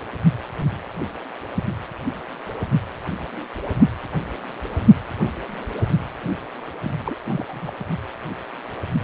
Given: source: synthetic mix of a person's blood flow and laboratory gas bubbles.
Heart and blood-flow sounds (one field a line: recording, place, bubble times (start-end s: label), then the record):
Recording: Doppler ultrasound of blood flow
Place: precordium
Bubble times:
6.83-6.91 s: bubbles
7.05-7.15 s: bubbles
7.24-7.72 s: bubbles
From the record:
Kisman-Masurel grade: 211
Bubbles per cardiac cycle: several, 3 to 8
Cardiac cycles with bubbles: 1 to 10%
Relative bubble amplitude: barely perceptible (0.100 to 0.250)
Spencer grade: 1 (occasional bubble signal discernible with the cardiac motion signal, with majority of cardiac periods free of bubbles)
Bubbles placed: only in the low amplitude regions of the cardiac cycle